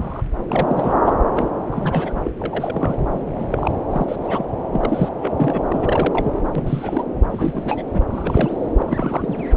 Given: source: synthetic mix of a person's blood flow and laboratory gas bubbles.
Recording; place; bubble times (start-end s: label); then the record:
Doppler ultrasound of blood flow; subclavian vein
0.00-0.23 s: bubbles
0.48-1.14 s: bubbles
1.35-1.48 s: bubbles
1.71-2.19 s: bubbles
2.23-2.31 s: bubbles
2.40-3.00 s: bubbles
3.09-3.33 s: bubbles
3.38-3.46 s: bubbles
3.50-3.71 s: bubbles
3.90-4.16 s: bubbles
4.22-4.46 s: bubbles
4.73-5.09 s: bubbles
5.19-5.31 s: bubbles
5.37-5.62 s: bubbles
5.67-6.33 s: bubbles
6.55-7.04 s: bubbles
7.29-7.83 s: bubbles
7.94-8.01 s: bubbles
8.09-8.57 s: bubbles
8.78-9.46 s: bubbles
9.55-9.57 s: bubbles
From the record:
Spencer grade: 3 (all of the cardiac periods contain showers or single bubble signals, but not dominating or overriding the cardiac motion signals); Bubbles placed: anywhere in the cardiac cycle